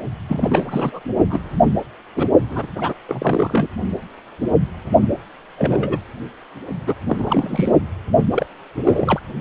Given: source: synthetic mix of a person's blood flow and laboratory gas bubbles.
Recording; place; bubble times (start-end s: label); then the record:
Doppler ultrasound of blood flow; precordium
0.28-1.00 s: bubbles
1.29-1.42 s: bubbles
2.15-2.27 s: bubbles
2.50-2.67 s: bubbles
2.75-2.94 s: bubbles
3.08-3.70 s: bubbles
5.58-5.98 s: bubbles
6.87-6.95 s: bubbles
7.08-7.73 s: bubbles
8.31-8.46 s: bubbles
8.85-9.20 s: bubbles
From the record:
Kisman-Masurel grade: 232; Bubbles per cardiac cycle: several, 3 to 8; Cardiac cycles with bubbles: 50 to 99%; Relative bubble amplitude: moderate (0.250 to 0.450); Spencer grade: 3 (all of the cardiac periods contain showers or single bubble signals, but not dominating or overriding the cardiac motion signals); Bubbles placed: only in the low amplitude regions of the cardiac cycle